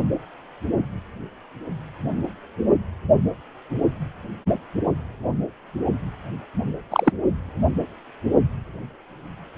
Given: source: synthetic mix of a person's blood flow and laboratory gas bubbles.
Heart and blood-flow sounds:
Doppler ultrasound of blood flow; precordium
6.91-7.12 s: bubbles
From the record:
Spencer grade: 1 (occasional bubble signal discernible with the cardiac motion signal, with majority of cardiac periods free of bubbles); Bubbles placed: only in the low amplitude regions of the cardiac cycle

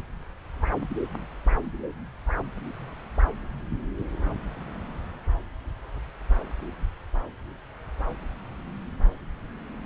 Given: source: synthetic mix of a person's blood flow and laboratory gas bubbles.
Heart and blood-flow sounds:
Doppler ultrasound of blood flow; subclavian vein
no bubbles
From the record:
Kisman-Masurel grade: 000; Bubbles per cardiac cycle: 0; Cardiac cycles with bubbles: 0%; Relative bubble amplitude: no bubbles discernible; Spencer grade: 0 (complete lack of bubble signals)

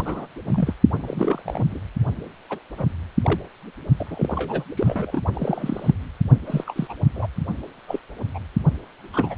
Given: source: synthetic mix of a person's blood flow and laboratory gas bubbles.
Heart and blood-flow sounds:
Doppler ultrasound of blood flow; precordium
0.00-0.27 s: bubbles
0.45-0.74 s: bubbles
0.99-1.42 s: bubbles
1.45-1.80 s: bubbles
2.49-2.59 s: bubbles
2.77-2.87 s: bubbles
3.23-3.40 s: bubbles
3.97-4.64 s: bubbles
4.75-5.21 s: bubbles
5.33-5.94 s: bubbles
6.45-6.94 s: bubbles
7.15-7.26 s: bubbles
7.87-7.99 s: bubbles
8.34-8.39 s: bubbles
9.12-9.35 s: bubbles
From the record:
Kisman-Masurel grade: 242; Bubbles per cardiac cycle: several, 3 to 8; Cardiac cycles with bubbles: 100%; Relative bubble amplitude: moderate (0.250 to 0.450); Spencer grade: 3 (all of the cardiac periods contain showers or single bubble signals, but not dominating or overriding the cardiac motion signals); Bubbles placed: only in the low amplitude regions of the cardiac cycle

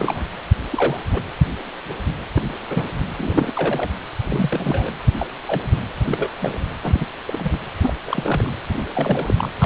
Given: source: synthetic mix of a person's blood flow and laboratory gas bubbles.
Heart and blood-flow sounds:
Doppler ultrasound of blood flow; precordium
0.00-0.24 s: bubbles
0.70-0.98 s: bubbles
1.13-1.23 s: bubbles
2.34-2.42 s: bubbles
2.69-2.83 s: bubbles
3.16-3.89 s: bubbles
4.26-4.90 s: bubbles
5.19-5.28 s: bubbles
5.46-5.62 s: bubbles
5.71-5.80 s: bubbles
6.05-6.32 s: bubbles
6.41-6.58 s: bubbles
6.83-7.05 s: bubbles
7.26-7.59 s: bubbles
7.81-7.93 s: bubbles
8.06-8.55 s: bubbles
8.73-8.85 s: bubbles
8.95-9.35 s: bubbles
9.38-9.49 s: bubbles
9.59-9.65 s: bubbles
From the record:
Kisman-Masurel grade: 232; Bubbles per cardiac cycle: several, 3 to 8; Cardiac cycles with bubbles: 50 to 99%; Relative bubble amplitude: moderate (0.250 to 0.450); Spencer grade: 3 (all of the cardiac periods contain showers or single bubble signals, but not dominating or overriding the cardiac motion signals); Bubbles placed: anywhere in the cardiac cycle

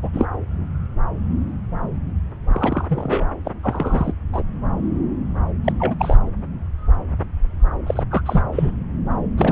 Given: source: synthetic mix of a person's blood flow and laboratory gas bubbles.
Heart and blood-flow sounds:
Doppler ultrasound of blood flow; subclavian vein
0.02-0.10 s: bubbles
0.12-0.26 s: bubbles
2.50-3.29 s: bubbles
3.45-3.52 s: bubbles
3.62-4.12 s: bubbles
4.32-4.42 s: bubbles
5.64-5.72 s: bubbles
5.79-5.95 s: bubbles
5.98-6.17 s: bubbles
7.86-8.03 s: bubbles
8.11-8.22 s: bubbles
8.25-8.41 s: bubbles
8.52-8.71 s: bubbles
9.38-9.52 s: bubbles
From the record:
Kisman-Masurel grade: 232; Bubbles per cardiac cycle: several, 3 to 8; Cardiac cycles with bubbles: 50 to 99%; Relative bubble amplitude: moderate (0.250 to 0.450); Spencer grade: 3 (all of the cardiac periods contain showers or single bubble signals, but not dominating or overriding the cardiac motion signals); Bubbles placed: anywhere in the cardiac cycle

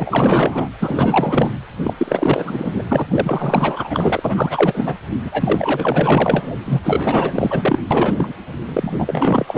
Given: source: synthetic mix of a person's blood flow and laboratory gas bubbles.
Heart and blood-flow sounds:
Doppler ultrasound of blood flow; precordium
0.00-0.68 s: bubbles
0.80-1.50 s: bubbles
1.83-1.94 s: bubbles
1.98-2.83 s: bubbles
2.88-3.06 s: bubbles
3.10-4.95 s: bubbles
5.25-6.51 s: bubbles
6.65-6.80 s: bubbles
6.84-7.79 s: bubbles
7.91-8.33 s: bubbles
8.65-9.58 s: bubbles
From the record:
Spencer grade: 4 (maximum detectable bubble signal sounding continuously throughout systole and diastole of every cardiac period, and overriding the amplitude of the normal cardiac signals); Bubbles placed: anywhere in the cardiac cycle

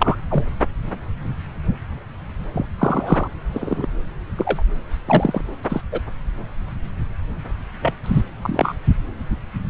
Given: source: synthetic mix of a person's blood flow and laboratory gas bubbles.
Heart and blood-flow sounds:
Doppler ultrasound of blood flow; subclavian vein
0.00-0.16 s: bubbles
0.30-0.44 s: bubbles
2.53-2.65 s: bubbles
2.78-3.27 s: bubbles
3.54-3.86 s: bubbles
4.38-4.63 s: bubbles
5.07-5.41 s: bubbles
5.69-5.81 s: bubbles
5.91-6.00 s: bubbles
7.81-7.93 s: bubbles
8.03-8.22 s: bubbles
8.41-8.75 s: bubbles
From the record:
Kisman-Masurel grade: 233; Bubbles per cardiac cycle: several, 3 to 8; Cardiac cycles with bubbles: 50 to 99%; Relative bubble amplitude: loud (0.450 to 0.775); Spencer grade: 3 (all of the cardiac periods contain showers or single bubble signals, but not dominating or overriding the cardiac motion signals); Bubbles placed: anywhere in the cardiac cycle

